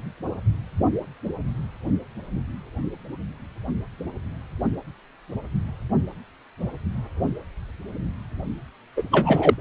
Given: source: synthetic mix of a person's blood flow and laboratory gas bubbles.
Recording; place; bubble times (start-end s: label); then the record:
Doppler ultrasound of blood flow; precordium
8.96-9.04 s: bubbles
9.12-9.54 s: bubbles
From the record:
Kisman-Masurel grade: 213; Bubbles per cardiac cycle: several, 3 to 8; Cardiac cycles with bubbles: 1 to 10%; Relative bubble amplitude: loud (0.450 to 0.775); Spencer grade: 1 (occasional bubble signal discernible with the cardiac motion signal, with majority of cardiac periods free of bubbles); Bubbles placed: only in the low amplitude regions of the cardiac cycle